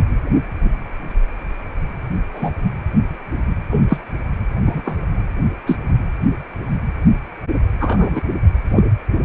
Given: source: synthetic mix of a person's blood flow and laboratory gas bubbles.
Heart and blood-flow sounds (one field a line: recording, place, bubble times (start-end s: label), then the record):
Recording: Doppler ultrasound of blood flow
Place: precordium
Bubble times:
2.34-2.50 s: bubbles
3.70-3.97 s: bubbles
4.66-4.82 s: bubbles
4.85-4.98 s: bubbles
5.67-5.78 s: bubbles
7.80-8.21 s: bubbles
8.74-8.83 s: bubbles
From the record:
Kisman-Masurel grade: 123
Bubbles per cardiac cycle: 1 to 2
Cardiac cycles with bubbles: 10 to 50%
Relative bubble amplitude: loud (0.450 to 0.775)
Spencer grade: 2 (many but less than half of the cardiac periods contain bubble signals, singularly or in groups)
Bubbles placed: anywhere in the cardiac cycle